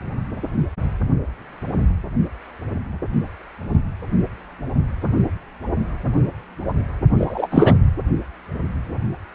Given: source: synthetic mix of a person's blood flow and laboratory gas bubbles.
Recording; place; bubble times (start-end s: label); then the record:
Doppler ultrasound of blood flow; precordium
7.18-7.47 s: bubbles
7.50-7.76 s: bubbles
From the record:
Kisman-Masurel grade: 213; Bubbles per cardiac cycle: several, 3 to 8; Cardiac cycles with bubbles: 1 to 10%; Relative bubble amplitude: loud (0.450 to 0.775); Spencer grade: 1 (occasional bubble signal discernible with the cardiac motion signal, with majority of cardiac periods free of bubbles); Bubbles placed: only in the low amplitude regions of the cardiac cycle